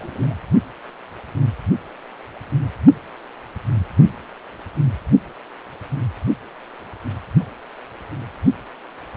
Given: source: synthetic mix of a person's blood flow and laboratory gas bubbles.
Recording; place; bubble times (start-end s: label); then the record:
Doppler ultrasound of blood flow; precordium
0.00-0.35 s: bubbles
From the record:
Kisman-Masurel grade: 111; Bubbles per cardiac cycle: 1 to 2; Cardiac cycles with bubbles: 1 to 10%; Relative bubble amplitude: barely perceptible (0.100 to 0.250); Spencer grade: 1 (occasional bubble signal discernible with the cardiac motion signal, with majority of cardiac periods free of bubbles); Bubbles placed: only in the low amplitude regions of the cardiac cycle